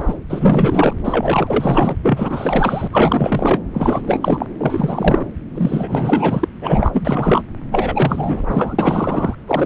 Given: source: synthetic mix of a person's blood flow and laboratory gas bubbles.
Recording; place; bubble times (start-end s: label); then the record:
Doppler ultrasound of blood flow; subclavian vein
0.00-0.17 s: bubbles
0.29-0.93 s: bubbles
1.04-2.00 s: bubbles
2.03-2.88 s: bubbles
2.92-3.59 s: bubbles
3.73-4.01 s: bubbles
4.06-4.46 s: bubbles
4.60-5.25 s: bubbles
5.54-6.48 s: bubbles
6.61-7.43 s: bubbles
7.71-8.45 s: bubbles
8.50-9.35 s: bubbles
9.47-9.66 s: bubbles
From the record:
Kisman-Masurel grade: 444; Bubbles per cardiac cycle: continuous sound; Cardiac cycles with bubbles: 100%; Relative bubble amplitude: maximal (0.775 to 0.999); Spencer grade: 4 (maximum detectable bubble signal sounding continuously throughout systole and diastole of every cardiac period, and overriding the amplitude of the normal cardiac signals); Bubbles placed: anywhere in the cardiac cycle